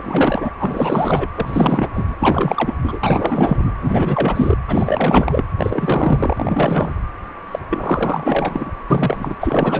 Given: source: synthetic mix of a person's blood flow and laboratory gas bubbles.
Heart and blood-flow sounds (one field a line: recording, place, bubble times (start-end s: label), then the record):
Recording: Doppler ultrasound of blood flow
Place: precordium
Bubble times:
0.00-0.50 s: bubbles
0.59-1.27 s: bubbles
1.35-1.89 s: bubbles
1.94-2.16 s: bubbles
2.19-2.74 s: bubbles
2.83-2.99 s: bubbles
3.03-3.73 s: bubbles
3.81-4.57 s: bubbles
4.67-5.43 s: bubbles
5.57-6.93 s: bubbles
7.51-7.59 s: bubbles
7.69-8.73 s: bubbles
8.90-9.35 s: bubbles
9.40-9.80 s: bubbles
From the record:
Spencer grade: 4 (maximum detectable bubble signal sounding continuously throughout systole and diastole of every cardiac period, and overriding the amplitude of the normal cardiac signals)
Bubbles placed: anywhere in the cardiac cycle